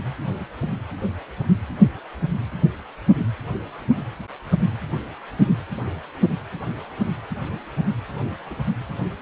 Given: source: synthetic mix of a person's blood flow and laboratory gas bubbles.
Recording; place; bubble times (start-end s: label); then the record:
Doppler ultrasound of blood flow; precordium
8.51-8.54 s: bubbles
From the record:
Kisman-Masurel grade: 111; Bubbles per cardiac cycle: 1 to 2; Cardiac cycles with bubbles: 1 to 10%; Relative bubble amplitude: barely perceptible (0.100 to 0.250); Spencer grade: 1 (occasional bubble signal discernible with the cardiac motion signal, with majority of cardiac periods free of bubbles); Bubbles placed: anywhere in the cardiac cycle